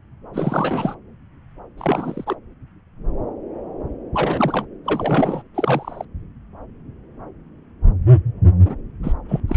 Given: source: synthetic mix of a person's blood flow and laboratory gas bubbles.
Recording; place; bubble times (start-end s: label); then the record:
Doppler ultrasound of blood flow; subclavian vein
0.33-0.94 s: bubbles
1.77-2.35 s: bubbles
4.13-4.67 s: bubbles
4.85-5.43 s: bubbles
5.54-6.05 s: bubbles
8.65-8.76 s: bubbles
9.03-9.12 s: bubbles
9.29-9.40 s: bubbles
9.48-9.56 s: bubbles
From the record:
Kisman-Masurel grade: 222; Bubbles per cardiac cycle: several, 3 to 8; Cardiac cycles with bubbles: 10 to 50%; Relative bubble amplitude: moderate (0.250 to 0.450); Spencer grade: 2 (many but less than half of the cardiac periods contain bubble signals, singularly or in groups); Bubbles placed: anywhere in the cardiac cycle